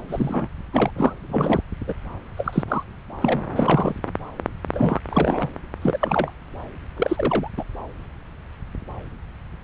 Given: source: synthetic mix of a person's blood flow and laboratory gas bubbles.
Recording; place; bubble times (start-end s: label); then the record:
Doppler ultrasound of blood flow; subclavian vein
0.09-0.48 s: bubbles
0.72-0.91 s: bubbles
0.95-1.14 s: bubbles
1.29-1.60 s: bubbles
1.87-1.93 s: bubbles
2.37-2.64 s: bubbles
2.68-2.83 s: bubbles
3.21-3.45 s: bubbles
3.56-3.94 s: bubbles
4.73-5.00 s: bubbles
5.10-5.49 s: bubbles
5.82-6.32 s: bubbles
6.96-7.50 s: bubbles
7.57-7.63 s: bubbles
From the record:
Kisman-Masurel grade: 232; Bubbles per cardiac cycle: several, 3 to 8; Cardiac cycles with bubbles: 50 to 99%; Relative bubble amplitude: moderate (0.250 to 0.450); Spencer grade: 3 (all of the cardiac periods contain showers or single bubble signals, but not dominating or overriding the cardiac motion signals); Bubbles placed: anywhere in the cardiac cycle